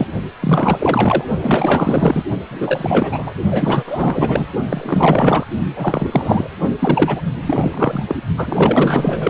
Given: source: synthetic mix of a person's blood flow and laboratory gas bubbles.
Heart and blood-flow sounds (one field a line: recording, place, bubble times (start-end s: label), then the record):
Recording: Doppler ultrasound of blood flow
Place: precordium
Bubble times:
0.00-0.07 s: bubbles
0.41-1.24 s: bubbles
1.41-2.23 s: bubbles
2.50-3.33 s: bubbles
3.51-3.83 s: bubbles
3.86-4.46 s: bubbles
4.69-5.45 s: bubbles
5.75-6.50 s: bubbles
6.79-7.21 s: bubbles
7.42-8.04 s: bubbles
8.07-8.17 s: bubbles
8.36-9.30 s: bubbles
From the record:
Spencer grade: 4 (maximum detectable bubble signal sounding continuously throughout systole and diastole of every cardiac period, and overriding the amplitude of the normal cardiac signals)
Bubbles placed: only in the low amplitude regions of the cardiac cycle